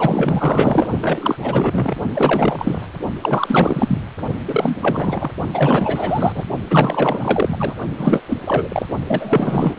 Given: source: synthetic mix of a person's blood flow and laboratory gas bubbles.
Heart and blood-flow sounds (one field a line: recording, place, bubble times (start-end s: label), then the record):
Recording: Doppler ultrasound of blood flow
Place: precordium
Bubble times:
0.00-0.88 s: bubbles
1.01-1.39 s: bubbles
1.42-2.02 s: bubbles
2.13-2.86 s: bubbles
3.21-4.01 s: bubbles
4.47-4.78 s: bubbles
4.81-5.31 s: bubbles
5.53-6.45 s: bubbles
6.70-7.73 s: bubbles
7.97-8.22 s: bubbles
8.28-8.38 s: bubbles
8.46-8.87 s: bubbles
9.07-9.74 s: bubbles
From the record:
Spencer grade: 4 (maximum detectable bubble signal sounding continuously throughout systole and diastole of every cardiac period, and overriding the amplitude of the normal cardiac signals)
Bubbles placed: only in the low amplitude regions of the cardiac cycle